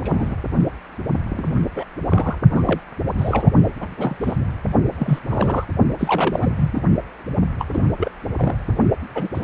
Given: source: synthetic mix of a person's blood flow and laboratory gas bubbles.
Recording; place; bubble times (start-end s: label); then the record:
Doppler ultrasound of blood flow; precordium
0.00-0.36 s: bubbles
1.30-1.66 s: bubbles
1.74-1.85 s: bubbles
2.08-2.38 s: bubbles
2.54-2.62 s: bubbles
2.65-2.81 s: bubbles
3.17-3.51 s: bubbles
3.80-3.87 s: bubbles
3.92-3.95 s: bubbles
3.97-4.17 s: bubbles
4.20-4.37 s: bubbles
4.98-5.19 s: bubbles
5.29-5.66 s: bubbles
5.98-6.50 s: bubbles
6.56-6.81 s: bubbles
7.59-7.65 s: bubbles
7.73-7.83 s: bubbles
7.97-8.12 s: bubbles
8.36-8.77 s: bubbles
9.14-9.28 s: bubbles
9.34-9.44 s: bubbles
From the record:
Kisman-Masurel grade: 232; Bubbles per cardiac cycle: several, 3 to 8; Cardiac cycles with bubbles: 50 to 99%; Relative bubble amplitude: moderate (0.250 to 0.450); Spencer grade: 3 (all of the cardiac periods contain showers or single bubble signals, but not dominating or overriding the cardiac motion signals); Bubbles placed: only in the low amplitude regions of the cardiac cycle